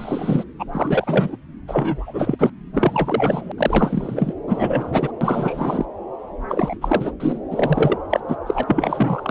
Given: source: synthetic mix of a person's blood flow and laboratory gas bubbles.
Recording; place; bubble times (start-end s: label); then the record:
Doppler ultrasound of blood flow; subclavian vein
0.00-0.44 s: bubbles
0.59-0.65 s: bubbles
0.72-1.36 s: bubbles
1.68-2.35 s: bubbles
2.39-2.50 s: bubbles
2.74-3.52 s: bubbles
3.57-4.33 s: bubbles
4.47-5.12 s: bubbles
5.21-5.85 s: bubbles
6.49-6.75 s: bubbles
6.81-7.12 s: bubbles
7.20-7.38 s: bubbles
7.51-7.98 s: bubbles
8.10-8.20 s: bubbles
8.28-8.35 s: bubbles
8.46-8.63 s: bubbles
8.67-9.30 s: bubbles
From the record:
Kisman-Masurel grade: 342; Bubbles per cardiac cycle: rolling drumbeat, 9 or more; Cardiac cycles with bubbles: 100%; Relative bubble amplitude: moderate (0.250 to 0.450); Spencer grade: 3 (all of the cardiac periods contain showers or single bubble signals, but not dominating or overriding the cardiac motion signals); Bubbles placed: anywhere in the cardiac cycle